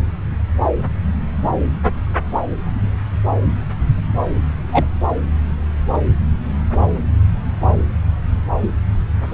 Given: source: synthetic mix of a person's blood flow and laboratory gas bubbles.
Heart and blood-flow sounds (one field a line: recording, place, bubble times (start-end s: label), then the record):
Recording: Doppler ultrasound of blood flow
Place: subclavian vein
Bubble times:
4.72-4.85 s: bubbles
From the record:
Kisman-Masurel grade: 123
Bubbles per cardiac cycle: 1 to 2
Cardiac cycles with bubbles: 10 to 50%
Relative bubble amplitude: loud (0.450 to 0.775)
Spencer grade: 2 (many but less than half of the cardiac periods contain bubble signals, singularly or in groups)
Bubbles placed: anywhere in the cardiac cycle